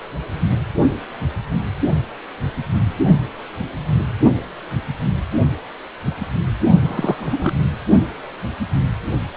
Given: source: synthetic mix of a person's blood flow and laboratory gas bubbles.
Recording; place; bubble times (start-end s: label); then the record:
Doppler ultrasound of blood flow; precordium
6.83-7.51 s: bubbles
From the record:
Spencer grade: 1 (occasional bubble signal discernible with the cardiac motion signal, with majority of cardiac periods free of bubbles); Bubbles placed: only in the low amplitude regions of the cardiac cycle